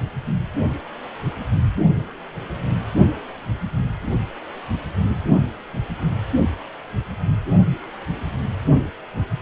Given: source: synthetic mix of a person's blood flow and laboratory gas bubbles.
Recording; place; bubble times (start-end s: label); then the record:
Doppler ultrasound of blood flow; precordium
no bubbles
From the record:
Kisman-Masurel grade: 000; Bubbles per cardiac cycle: 0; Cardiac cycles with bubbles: 0%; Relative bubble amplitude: no bubbles discernible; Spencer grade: 0 (complete lack of bubble signals)